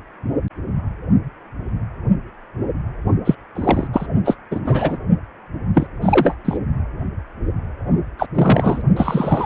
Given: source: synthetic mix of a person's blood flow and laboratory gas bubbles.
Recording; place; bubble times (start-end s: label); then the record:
Doppler ultrasound of blood flow; precordium
3.25-3.35 s: bubbles
3.55-3.87 s: bubbles
3.93-4.07 s: bubbles
4.25-4.36 s: bubbles
4.51-4.60 s: bubbles
4.65-4.98 s: bubbles
5.74-5.87 s: bubbles
6.02-6.35 s: bubbles
6.45-6.57 s: bubbles
8.18-8.26 s: bubbles
8.34-8.81 s: bubbles
8.96-9.46 s: bubbles
From the record:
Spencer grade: 3 (all of the cardiac periods contain showers or single bubble signals, but not dominating or overriding the cardiac motion signals); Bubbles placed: only in the low amplitude regions of the cardiac cycle